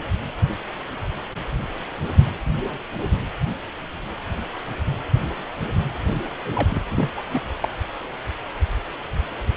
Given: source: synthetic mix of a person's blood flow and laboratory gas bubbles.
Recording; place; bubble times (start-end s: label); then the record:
Doppler ultrasound of blood flow; precordium
6.55-6.82 s: bubbles
6.90-7.09 s: bubbles
7.17-7.20 s: bubbles
7.30-7.48 s: bubbles
7.56-7.68 s: bubbles
From the record:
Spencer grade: 1 (occasional bubble signal discernible with the cardiac motion signal, with majority of cardiac periods free of bubbles); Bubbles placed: anywhere in the cardiac cycle